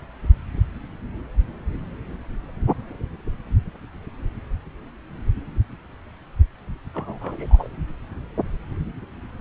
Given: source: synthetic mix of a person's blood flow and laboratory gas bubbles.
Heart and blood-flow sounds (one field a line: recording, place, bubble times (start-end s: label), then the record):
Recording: Doppler ultrasound of blood flow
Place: subclavian vein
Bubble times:
6.94-7.68 s: bubbles
From the record:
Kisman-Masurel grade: 111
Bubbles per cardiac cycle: 1 to 2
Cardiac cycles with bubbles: 1 to 10%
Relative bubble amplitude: barely perceptible (0.100 to 0.250)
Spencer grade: 1 (occasional bubble signal discernible with the cardiac motion signal, with majority of cardiac periods free of bubbles)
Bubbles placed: anywhere in the cardiac cycle